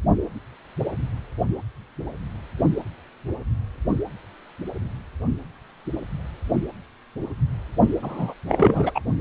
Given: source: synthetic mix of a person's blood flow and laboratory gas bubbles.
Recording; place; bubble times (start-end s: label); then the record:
Doppler ultrasound of blood flow; precordium
8.03-8.34 s: bubbles
8.49-9.01 s: bubbles
From the record:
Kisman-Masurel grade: 212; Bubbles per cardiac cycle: several, 3 to 8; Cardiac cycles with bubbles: 1 to 10%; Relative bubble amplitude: moderate (0.250 to 0.450); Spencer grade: 1 (occasional bubble signal discernible with the cardiac motion signal, with majority of cardiac periods free of bubbles); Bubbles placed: only in the low amplitude regions of the cardiac cycle